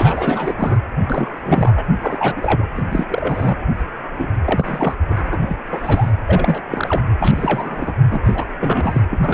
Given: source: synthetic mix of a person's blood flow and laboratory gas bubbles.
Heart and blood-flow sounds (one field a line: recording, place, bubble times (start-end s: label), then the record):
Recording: Doppler ultrasound of blood flow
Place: precordium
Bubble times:
0.00-0.53 s: bubbles
0.57-0.77 s: bubbles
1.00-1.36 s: bubbles
1.45-1.85 s: bubbles
2.02-2.66 s: bubbles
2.75-3.06 s: bubbles
3.08-3.58 s: bubbles
4.14-4.30 s: bubbles
4.45-4.96 s: bubbles
5.09-5.57 s: bubbles
5.73-6.12 s: bubbles
6.26-6.62 s: bubbles
6.70-7.03 s: bubbles
7.19-7.93 s: bubbles
8.11-8.21 s: bubbles
8.24-8.45 s: bubbles
8.61-9.02 s: bubbles
9.10-9.34 s: bubbles
From the record:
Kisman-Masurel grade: 342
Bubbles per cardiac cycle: rolling drumbeat, 9 or more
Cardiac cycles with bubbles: 100%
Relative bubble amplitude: moderate (0.250 to 0.450)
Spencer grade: 3 (all of the cardiac periods contain showers or single bubble signals, but not dominating or overriding the cardiac motion signals)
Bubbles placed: anywhere in the cardiac cycle